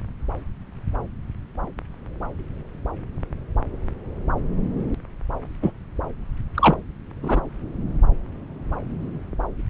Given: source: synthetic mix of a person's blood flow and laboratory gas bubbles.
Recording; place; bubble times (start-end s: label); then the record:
Doppler ultrasound of blood flow; subclavian vein
5.62-5.71 s: bubbles
6.55-6.75 s: bubbles
7.22-7.40 s: bubbles
From the record:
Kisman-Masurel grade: 123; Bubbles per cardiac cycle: 1 to 2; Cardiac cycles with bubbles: 10 to 50%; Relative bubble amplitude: loud (0.450 to 0.775); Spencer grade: 2 (many but less than half of the cardiac periods contain bubble signals, singularly or in groups); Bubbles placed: anywhere in the cardiac cycle